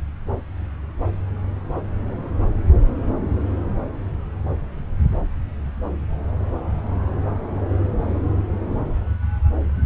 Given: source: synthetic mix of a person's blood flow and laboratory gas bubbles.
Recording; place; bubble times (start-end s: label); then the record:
Doppler ultrasound of blood flow; subclavian vein
no bubbles
From the record:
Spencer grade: 0 (complete lack of bubble signals)